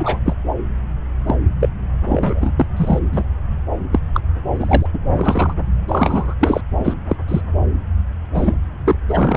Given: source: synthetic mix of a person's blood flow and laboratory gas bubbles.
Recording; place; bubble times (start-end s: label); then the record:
Doppler ultrasound of blood flow; subclavian vein
0.00-0.18 s: bubbles
0.25-0.34 s: bubbles
1.26-1.35 s: bubbles
1.60-1.69 s: bubbles
2.08-2.51 s: bubbles
2.56-2.65 s: bubbles
2.76-2.99 s: bubbles
3.11-3.23 s: bubbles
3.92-4.00 s: bubbles
4.13-4.20 s: bubbles
4.56-4.87 s: bubbles
4.93-5.00 s: bubbles
5.12-5.54 s: bubbles
5.88-6.34 s: bubbles
6.40-6.61 s: bubbles
6.79-6.95 s: bubbles
7.09-7.16 s: bubbles
7.27-7.41 s: bubbles
8.35-8.54 s: bubbles
8.86-8.96 s: bubbles
9.08-9.37 s: bubbles
From the record:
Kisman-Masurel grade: 243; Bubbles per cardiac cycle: several, 3 to 8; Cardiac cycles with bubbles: 100%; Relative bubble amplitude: loud (0.450 to 0.775); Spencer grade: 3 (all of the cardiac periods contain showers or single bubble signals, but not dominating or overriding the cardiac motion signals); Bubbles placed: anywhere in the cardiac cycle